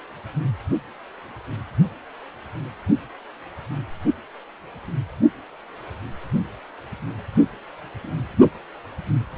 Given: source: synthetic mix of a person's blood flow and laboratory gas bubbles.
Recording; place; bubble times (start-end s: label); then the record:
Doppler ultrasound of blood flow; precordium
no bubbles
From the record:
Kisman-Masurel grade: 000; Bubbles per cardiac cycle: 0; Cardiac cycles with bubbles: 0%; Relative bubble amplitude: no bubbles discernible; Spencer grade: 0 (complete lack of bubble signals)